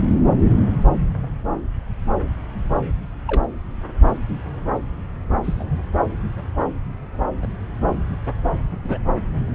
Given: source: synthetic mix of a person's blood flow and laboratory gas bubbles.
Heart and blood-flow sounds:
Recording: Doppler ultrasound of blood flow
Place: subclavian vein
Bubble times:
3.27-3.45 s: bubbles
4.08-4.16 s: bubbles
5.43-5.79 s: bubbles
7.42-7.48 s: bubbles
8.84-8.98 s: bubbles
From the record:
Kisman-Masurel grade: 122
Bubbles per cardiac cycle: 1 to 2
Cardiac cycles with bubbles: 10 to 50%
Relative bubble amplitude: moderate (0.250 to 0.450)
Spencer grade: 2 (many but less than half of the cardiac periods contain bubble signals, singularly or in groups)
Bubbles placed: anywhere in the cardiac cycle

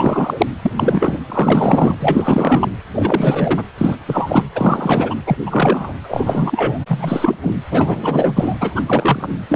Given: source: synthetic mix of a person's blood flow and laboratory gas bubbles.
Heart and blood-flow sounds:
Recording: Doppler ultrasound of blood flow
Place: precordium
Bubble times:
0.00-0.47 s: bubbles
0.61-0.72 s: bubbles
0.76-1.19 s: bubbles
1.29-1.94 s: bubbles
2.00-2.69 s: bubbles
2.93-3.65 s: bubbles
3.77-3.97 s: bubbles
4.06-4.43 s: bubbles
4.55-5.15 s: bubbles
5.25-5.37 s: bubbles
5.46-5.94 s: bubbles
6.03-6.79 s: bubbles
6.88-7.36 s: bubbles
7.42-7.52 s: bubbles
7.71-8.54 s: bubbles
8.61-8.83 s: bubbles
8.86-9.29 s: bubbles
9.49-9.56 s: bubbles
From the record:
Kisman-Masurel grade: 343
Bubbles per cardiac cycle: rolling drumbeat, 9 or more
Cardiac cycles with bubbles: 100%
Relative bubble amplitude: loud (0.450 to 0.775)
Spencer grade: 3 (all of the cardiac periods contain showers or single bubble signals, but not dominating or overriding the cardiac motion signals)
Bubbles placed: anywhere in the cardiac cycle

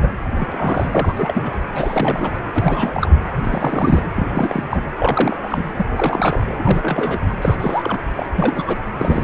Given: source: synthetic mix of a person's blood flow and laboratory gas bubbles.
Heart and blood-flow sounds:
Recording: Doppler ultrasound of blood flow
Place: precordium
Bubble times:
0.03-0.08 s: bubbles
0.34-1.64 s: bubbles
1.74-2.38 s: bubbles
2.54-3.12 s: bubbles
3.43-4.03 s: bubbles
4.16-4.64 s: bubbles
4.70-4.83 s: bubbles
4.96-5.37 s: bubbles
5.42-5.72 s: bubbles
5.77-5.86 s: bubbles
5.88-7.20 s: bubbles
7.42-7.98 s: bubbles
8.15-8.26 s: bubbles
8.32-8.78 s: bubbles
8.97-9.24 s: bubbles
From the record:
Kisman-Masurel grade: 342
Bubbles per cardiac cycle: rolling drumbeat, 9 or more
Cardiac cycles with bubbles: 100%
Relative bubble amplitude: moderate (0.250 to 0.450)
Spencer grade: 3 (all of the cardiac periods contain showers or single bubble signals, but not dominating or overriding the cardiac motion signals)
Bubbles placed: anywhere in the cardiac cycle

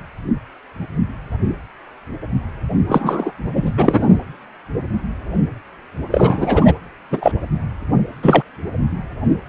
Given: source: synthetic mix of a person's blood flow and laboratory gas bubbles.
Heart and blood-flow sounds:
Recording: Doppler ultrasound of blood flow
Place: precordium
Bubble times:
2.88-3.33 s: bubbles
3.54-3.73 s: bubbles
3.77-4.18 s: bubbles
6.11-6.74 s: bubbles
7.10-7.31 s: bubbles
8.22-8.43 s: bubbles
From the record:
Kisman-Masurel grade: 233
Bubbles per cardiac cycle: several, 3 to 8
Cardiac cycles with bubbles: 50 to 99%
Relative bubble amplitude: loud (0.450 to 0.775)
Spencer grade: 3 (all of the cardiac periods contain showers or single bubble signals, but not dominating or overriding the cardiac motion signals)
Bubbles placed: anywhere in the cardiac cycle

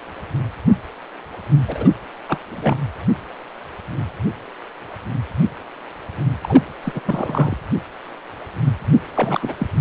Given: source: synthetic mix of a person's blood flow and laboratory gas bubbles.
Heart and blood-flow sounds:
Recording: Doppler ultrasound of blood flow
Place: precordium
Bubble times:
1.67-1.89 s: bubbles
2.28-2.39 s: bubbles
2.52-2.78 s: bubbles
6.42-6.64 s: bubbles
6.83-7.02 s: bubbles
7.05-7.56 s: bubbles
9.14-9.54 s: bubbles
9.58-9.67 s: bubbles
From the record:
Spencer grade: 2 (many but less than half of the cardiac periods contain bubble signals, singularly or in groups)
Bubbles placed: anywhere in the cardiac cycle

